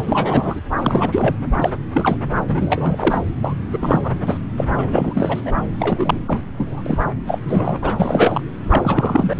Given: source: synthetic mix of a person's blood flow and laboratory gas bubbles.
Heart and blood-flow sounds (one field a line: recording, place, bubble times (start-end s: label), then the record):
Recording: Doppler ultrasound of blood flow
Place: subclavian vein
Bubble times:
0.00-0.60 s: bubbles
0.78-1.36 s: bubbles
1.56-1.70 s: bubbles
1.93-2.17 s: bubbles
2.48-3.18 s: bubbles
3.42-3.54 s: bubbles
3.68-4.38 s: bubbles
4.57-4.65 s: bubbles
4.74-5.41 s: bubbles
5.46-5.52 s: bubbles
5.79-6.23 s: bubbles
6.28-6.41 s: bubbles
6.57-6.82 s: bubbles
6.86-6.98 s: bubbles
7.27-7.39 s: bubbles
7.48-7.76 s: bubbles
7.82-8.41 s: bubbles
8.70-9.33 s: bubbles
9.36-9.40 s: bubbles
From the record:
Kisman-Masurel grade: 343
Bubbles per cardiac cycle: rolling drumbeat, 9 or more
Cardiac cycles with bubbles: 100%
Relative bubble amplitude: loud (0.450 to 0.775)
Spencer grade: 3 (all of the cardiac periods contain showers or single bubble signals, but not dominating or overriding the cardiac motion signals)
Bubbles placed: anywhere in the cardiac cycle